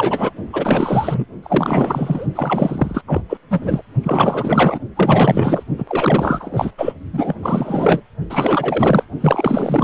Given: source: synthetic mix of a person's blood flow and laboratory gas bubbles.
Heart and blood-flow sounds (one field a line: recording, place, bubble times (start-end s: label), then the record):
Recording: Doppler ultrasound of blood flow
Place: precordium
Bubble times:
0.00-0.33 s: bubbles
0.53-1.25 s: bubbles
1.42-2.26 s: bubbles
2.35-3.02 s: bubbles
3.06-3.21 s: bubbles
3.29-3.38 s: bubbles
3.49-3.81 s: bubbles
4.03-4.79 s: bubbles
4.96-5.63 s: bubbles
5.78-5.85 s: bubbles
5.87-6.72 s: bubbles
6.78-6.93 s: bubbles
7.12-7.35 s: bubbles
7.43-8.01 s: bubbles
8.29-9.05 s: bubbles
9.21-9.84 s: bubbles
From the record:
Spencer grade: 4 (maximum detectable bubble signal sounding continuously throughout systole and diastole of every cardiac period, and overriding the amplitude of the normal cardiac signals)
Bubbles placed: only in the low amplitude regions of the cardiac cycle